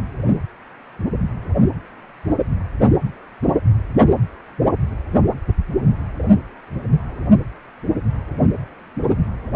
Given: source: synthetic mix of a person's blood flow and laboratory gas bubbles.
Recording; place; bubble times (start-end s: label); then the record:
Doppler ultrasound of blood flow; precordium
no bubbles
From the record:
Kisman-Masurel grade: 000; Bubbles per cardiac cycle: 0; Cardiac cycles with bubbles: 0%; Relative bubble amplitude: no bubbles discernible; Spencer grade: 0 (complete lack of bubble signals)